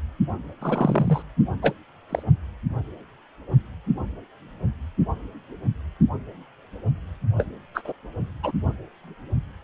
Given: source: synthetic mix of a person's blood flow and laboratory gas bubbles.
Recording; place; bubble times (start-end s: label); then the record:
Doppler ultrasound of blood flow; precordium
0.61-1.22 s: bubbles
1.62-1.73 s: bubbles
2.09-2.23 s: bubbles
7.38-7.46 s: bubbles
7.74-7.92 s: bubbles
8.43-8.52 s: bubbles
From the record:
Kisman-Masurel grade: 223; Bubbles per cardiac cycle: several, 3 to 8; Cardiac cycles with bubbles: 10 to 50%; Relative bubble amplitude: loud (0.450 to 0.775); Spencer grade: 2 (many but less than half of the cardiac periods contain bubble signals, singularly or in groups); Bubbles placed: only in the low amplitude regions of the cardiac cycle